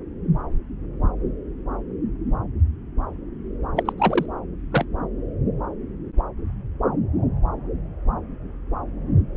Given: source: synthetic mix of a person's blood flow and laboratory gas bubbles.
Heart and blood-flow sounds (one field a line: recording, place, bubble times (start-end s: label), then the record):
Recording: Doppler ultrasound of blood flow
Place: subclavian vein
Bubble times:
3.76-3.93 s: bubbles
3.98-4.25 s: bubbles
4.72-4.86 s: bubbles
From the record:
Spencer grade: 1 (occasional bubble signal discernible with the cardiac motion signal, with majority of cardiac periods free of bubbles)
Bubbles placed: anywhere in the cardiac cycle